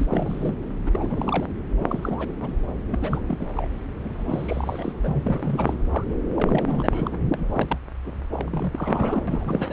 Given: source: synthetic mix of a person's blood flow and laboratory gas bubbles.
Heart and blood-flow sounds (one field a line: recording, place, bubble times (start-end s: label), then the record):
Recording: Doppler ultrasound of blood flow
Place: subclavian vein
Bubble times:
0.00-0.55 s: bubbles
0.85-1.47 s: bubbles
1.76-2.30 s: bubbles
2.41-2.52 s: bubbles
2.85-3.22 s: bubbles
3.28-3.47 s: bubbles
3.54-3.68 s: bubbles
4.04-4.93 s: bubbles
5.03-5.75 s: bubbles
5.89-6.04 s: bubbles
6.34-7.19 s: bubbles
7.34-7.78 s: bubbles
8.04-8.13 s: bubbles
8.30-9.23 s: bubbles
9.27-9.73 s: bubbles
From the record:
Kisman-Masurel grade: 342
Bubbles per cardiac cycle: rolling drumbeat, 9 or more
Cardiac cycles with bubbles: 100%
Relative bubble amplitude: moderate (0.250 to 0.450)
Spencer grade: 3 (all of the cardiac periods contain showers or single bubble signals, but not dominating or overriding the cardiac motion signals)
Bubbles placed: anywhere in the cardiac cycle